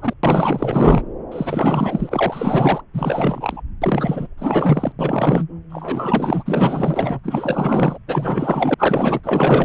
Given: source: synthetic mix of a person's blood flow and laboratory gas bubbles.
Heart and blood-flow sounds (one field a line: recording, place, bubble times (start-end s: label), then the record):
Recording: Doppler ultrasound of blood flow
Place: subclavian vein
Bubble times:
0.00-0.14 s: bubbles
0.23-1.02 s: bubbles
1.31-2.81 s: bubbles
2.94-3.61 s: bubbles
3.81-4.27 s: bubbles
4.38-4.92 s: bubbles
4.99-5.45 s: bubbles
5.70-7.20 s: bubbles
7.24-7.98 s: bubbles
8.08-8.75 s: bubbles
8.78-9.20 s: bubbles
9.24-9.65 s: bubbles
From the record:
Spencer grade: 4 (maximum detectable bubble signal sounding continuously throughout systole and diastole of every cardiac period, and overriding the amplitude of the normal cardiac signals)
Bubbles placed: anywhere in the cardiac cycle